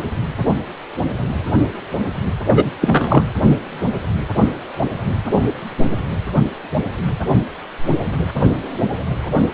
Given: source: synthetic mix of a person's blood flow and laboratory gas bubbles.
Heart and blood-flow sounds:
Doppler ultrasound of blood flow; precordium
2.46-2.71 s: bubbles
2.80-3.23 s: bubbles
From the record:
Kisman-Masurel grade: 213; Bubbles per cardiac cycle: several, 3 to 8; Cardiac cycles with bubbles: 1 to 10%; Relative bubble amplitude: loud (0.450 to 0.775); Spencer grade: 1 (occasional bubble signal discernible with the cardiac motion signal, with majority of cardiac periods free of bubbles); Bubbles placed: anywhere in the cardiac cycle

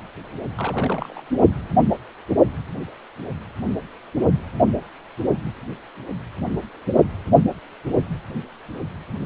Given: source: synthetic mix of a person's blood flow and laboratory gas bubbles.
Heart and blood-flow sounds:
Doppler ultrasound of blood flow; precordium
0.57-1.22 s: bubbles
From the record:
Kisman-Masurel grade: 111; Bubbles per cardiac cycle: 1 to 2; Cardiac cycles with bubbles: 1 to 10%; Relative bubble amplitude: barely perceptible (0.100 to 0.250); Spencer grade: 1 (occasional bubble signal discernible with the cardiac motion signal, with majority of cardiac periods free of bubbles); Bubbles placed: only in the low amplitude regions of the cardiac cycle

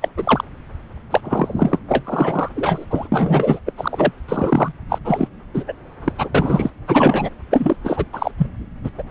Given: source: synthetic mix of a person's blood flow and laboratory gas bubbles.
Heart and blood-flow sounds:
Doppler ultrasound of blood flow; subclavian vein
0.02-0.09 s: bubbles
0.16-0.44 s: bubbles
1.10-1.21 s: bubbles
1.24-1.79 s: bubbles
1.88-2.48 s: bubbles
2.55-2.85 s: bubbles
2.90-3.08 s: bubbles
3.12-3.59 s: bubbles
3.66-3.73 s: bubbles
3.78-4.12 s: bubbles
4.28-4.72 s: bubbles
4.90-4.99 s: bubbles
5.04-5.28 s: bubbles
5.54-5.63 s: bubbles
5.67-5.74 s: bubbles
6.04-6.12 s: bubbles
6.18-6.29 s: bubbles
6.34-6.70 s: bubbles
6.87-7.29 s: bubbles
7.50-7.76 s: bubbles
7.83-8.05 s: bubbles
8.12-8.31 s: bubbles
8.38-8.47 s: bubbles
8.84-8.90 s: bubbles
8.98-9.04 s: bubbles
From the record:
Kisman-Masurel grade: 243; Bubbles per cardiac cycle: several, 3 to 8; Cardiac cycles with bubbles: 100%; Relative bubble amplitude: loud (0.450 to 0.775); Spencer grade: 3 (all of the cardiac periods contain showers or single bubble signals, but not dominating or overriding the cardiac motion signals); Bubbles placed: anywhere in the cardiac cycle

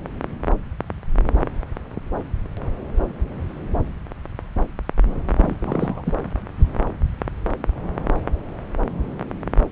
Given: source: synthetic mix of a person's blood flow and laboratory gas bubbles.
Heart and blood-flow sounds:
Doppler ultrasound of blood flow; subclavian vein
5.36-5.55 s: bubbles
5.59-6.13 s: bubbles
From the record:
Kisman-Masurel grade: 212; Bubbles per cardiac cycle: several, 3 to 8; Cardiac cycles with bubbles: 1 to 10%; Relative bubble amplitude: moderate (0.250 to 0.450); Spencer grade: 1 (occasional bubble signal discernible with the cardiac motion signal, with majority of cardiac periods free of bubbles); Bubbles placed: anywhere in the cardiac cycle

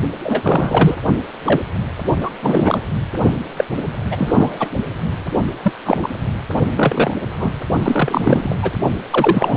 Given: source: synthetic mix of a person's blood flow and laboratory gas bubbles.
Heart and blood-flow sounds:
Doppler ultrasound of blood flow; precordium
0.23-0.96 s: bubbles
1.46-1.62 s: bubbles
2.21-2.29 s: bubbles
2.42-2.81 s: bubbles
3.56-3.65 s: bubbles
4.11-4.69 s: bubbles
5.63-5.73 s: bubbles
5.85-6.09 s: bubbles
6.76-7.14 s: bubbles
7.37-7.53 s: bubbles
7.83-8.57 s: bubbles
8.62-8.75 s: bubbles
9.10-9.57 s: bubbles
From the record:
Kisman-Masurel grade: 243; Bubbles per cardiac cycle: several, 3 to 8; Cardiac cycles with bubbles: 100%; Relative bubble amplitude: loud (0.450 to 0.775); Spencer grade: 3 (all of the cardiac periods contain showers or single bubble signals, but not dominating or overriding the cardiac motion signals); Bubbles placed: only in the low amplitude regions of the cardiac cycle

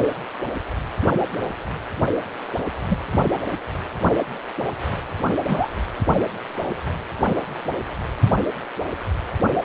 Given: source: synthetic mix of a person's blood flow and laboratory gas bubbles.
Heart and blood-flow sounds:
Doppler ultrasound of blood flow; precordium
2.89-2.97 s: bubbles
5.46-5.84 s: bubbles
From the record:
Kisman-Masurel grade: 122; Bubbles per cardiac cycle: 1 to 2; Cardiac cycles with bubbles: 10 to 50%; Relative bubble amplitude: moderate (0.250 to 0.450); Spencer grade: 2 (many but less than half of the cardiac periods contain bubble signals, singularly or in groups); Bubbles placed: anywhere in the cardiac cycle

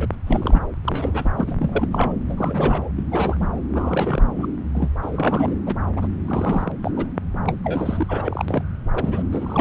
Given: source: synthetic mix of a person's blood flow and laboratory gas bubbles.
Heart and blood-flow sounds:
Doppler ultrasound of blood flow; subclavian vein
0.00-0.08 s: bubbles
0.12-0.16 s: bubbles
0.27-0.66 s: bubbles
0.84-1.32 s: bubbles
1.36-1.55 s: bubbles
1.59-1.88 s: bubbles
1.91-2.13 s: bubbles
2.29-2.90 s: bubbles
2.96-3.03 s: bubbles
3.10-3.52 s: bubbles
3.74-4.27 s: bubbles
4.37-4.49 s: bubbles
4.75-4.89 s: bubbles
5.02-5.54 s: bubbles
5.66-5.75 s: bubbles
5.96-6.07 s: bubbles
6.27-6.71 s: bubbles
6.83-6.91 s: bubbles
6.96-7.08 s: bubbles
7.46-7.56 s: bubbles
7.64-8.45 s: bubbles
8.48-8.63 s: bubbles
8.92-9.23 s: bubbles
9.32-9.61 s: bubbles
From the record:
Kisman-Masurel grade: 332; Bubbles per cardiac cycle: rolling drumbeat, 9 or more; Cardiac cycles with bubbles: 50 to 99%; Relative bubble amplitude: moderate (0.250 to 0.450); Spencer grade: 3 (all of the cardiac periods contain showers or single bubble signals, but not dominating or overriding the cardiac motion signals); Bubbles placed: anywhere in the cardiac cycle

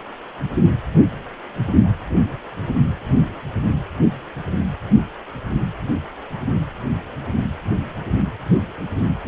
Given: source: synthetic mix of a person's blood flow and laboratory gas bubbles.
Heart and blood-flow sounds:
Doppler ultrasound of blood flow; precordium
9.25-9.28 s: bubbles
From the record:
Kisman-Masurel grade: 211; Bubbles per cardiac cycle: several, 3 to 8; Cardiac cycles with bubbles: 1 to 10%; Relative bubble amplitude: barely perceptible (0.100 to 0.250); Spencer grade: 1 (occasional bubble signal discernible with the cardiac motion signal, with majority of cardiac periods free of bubbles); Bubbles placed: anywhere in the cardiac cycle

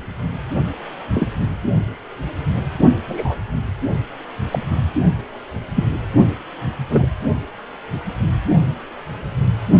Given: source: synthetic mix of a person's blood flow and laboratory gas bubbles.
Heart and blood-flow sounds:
Doppler ultrasound of blood flow; precordium
1.14-1.28 s: bubbles
3.07-3.36 s: bubbles
4.51-4.59 s: bubbles
5.75-5.88 s: bubbles
6.90-7.06 s: bubbles
From the record:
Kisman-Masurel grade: 122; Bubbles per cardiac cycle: 1 to 2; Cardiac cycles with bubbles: 10 to 50%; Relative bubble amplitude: moderate (0.250 to 0.450); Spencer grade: 2 (many but less than half of the cardiac periods contain bubble signals, singularly or in groups); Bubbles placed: only in the low amplitude regions of the cardiac cycle

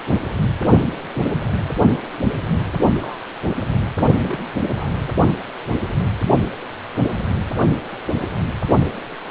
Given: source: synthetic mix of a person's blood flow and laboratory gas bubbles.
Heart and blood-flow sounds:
Doppler ultrasound of blood flow; precordium
1.12-1.20 s: bubbles
3.00-3.18 s: bubbles
4.21-4.38 s: bubbles
4.68-4.90 s: bubbles
From the record:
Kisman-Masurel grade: 121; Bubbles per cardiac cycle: 1 to 2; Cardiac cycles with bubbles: 10 to 50%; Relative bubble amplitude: barely perceptible (0.100 to 0.250); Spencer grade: 2 (many but less than half of the cardiac periods contain bubble signals, singularly or in groups); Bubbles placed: only in the low amplitude regions of the cardiac cycle

